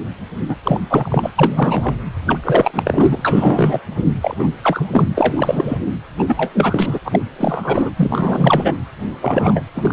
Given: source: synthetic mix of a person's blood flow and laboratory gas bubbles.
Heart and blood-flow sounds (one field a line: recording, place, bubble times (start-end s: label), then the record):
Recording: Doppler ultrasound of blood flow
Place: precordium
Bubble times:
0.48-0.55 s: bubbles
0.64-0.80 s: bubbles
0.89-1.31 s: bubbles
1.38-1.95 s: bubbles
2.26-2.38 s: bubbles
2.44-3.80 s: bubbles
4.21-4.35 s: bubbles
4.38-4.50 s: bubbles
4.63-4.86 s: bubbles
4.91-5.06 s: bubbles
5.14-5.78 s: bubbles
6.18-6.24 s: bubbles
6.27-7.00 s: bubbles
7.04-7.19 s: bubbles
7.38-7.90 s: bubbles
7.96-8.73 s: bubbles
9.21-9.61 s: bubbles
9.75-9.93 s: bubbles
From the record:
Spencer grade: 3 (all of the cardiac periods contain showers or single bubble signals, but not dominating or overriding the cardiac motion signals)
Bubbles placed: anywhere in the cardiac cycle